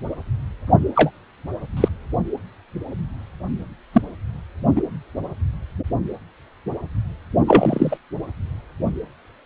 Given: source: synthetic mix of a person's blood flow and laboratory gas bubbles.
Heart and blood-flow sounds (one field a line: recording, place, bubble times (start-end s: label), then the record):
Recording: Doppler ultrasound of blood flow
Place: precordium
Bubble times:
0.96-1.10 s: bubbles
1.76-1.89 s: bubbles
3.92-4.01 s: bubbles
4.75-4.81 s: bubbles
7.47-7.97 s: bubbles
From the record:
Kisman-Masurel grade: 123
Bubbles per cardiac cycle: 1 to 2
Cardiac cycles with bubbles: 10 to 50%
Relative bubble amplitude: loud (0.450 to 0.775)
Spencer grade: 2 (many but less than half of the cardiac periods contain bubble signals, singularly or in groups)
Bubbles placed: only in the low amplitude regions of the cardiac cycle